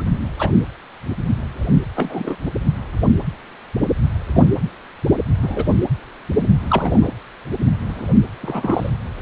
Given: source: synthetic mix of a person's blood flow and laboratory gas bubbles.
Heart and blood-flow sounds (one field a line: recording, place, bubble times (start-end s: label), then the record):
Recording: Doppler ultrasound of blood flow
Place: precordium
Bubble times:
0.00-0.03 s: bubbles
0.39-0.51 s: bubbles
1.96-2.36 s: bubbles
4.34-4.44 s: bubbles
5.42-5.64 s: bubbles
6.70-7.08 s: bubbles
7.88-8.06 s: bubbles
8.42-8.90 s: bubbles
From the record:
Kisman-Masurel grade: 122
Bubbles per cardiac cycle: 1 to 2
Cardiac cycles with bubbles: 10 to 50%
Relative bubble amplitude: moderate (0.250 to 0.450)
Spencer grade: 2 (many but less than half of the cardiac periods contain bubble signals, singularly or in groups)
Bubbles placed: anywhere in the cardiac cycle